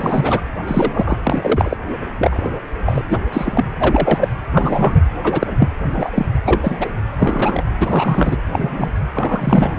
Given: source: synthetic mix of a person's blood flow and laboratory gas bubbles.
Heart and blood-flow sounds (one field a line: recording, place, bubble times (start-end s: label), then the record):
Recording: Doppler ultrasound of blood flow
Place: precordium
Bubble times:
0.00-0.41 s: bubbles
0.67-1.18 s: bubbles
1.23-1.77 s: bubbles
2.19-2.50 s: bubbles
2.85-3.02 s: bubbles
3.09-3.20 s: bubbles
3.32-3.72 s: bubbles
3.79-4.29 s: bubbles
4.54-5.02 s: bubbles
5.23-5.47 s: bubbles
5.59-5.69 s: bubbles
5.93-6.11 s: bubbles
6.14-6.26 s: bubbles
6.45-6.92 s: bubbles
7.12-7.63 s: bubbles
7.79-8.37 s: bubbles
8.52-8.91 s: bubbles
9.13-9.79 s: bubbles
From the record:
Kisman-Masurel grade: 243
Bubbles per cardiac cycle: several, 3 to 8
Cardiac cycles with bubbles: 100%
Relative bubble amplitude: loud (0.450 to 0.775)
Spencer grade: 3 (all of the cardiac periods contain showers or single bubble signals, but not dominating or overriding the cardiac motion signals)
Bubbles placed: anywhere in the cardiac cycle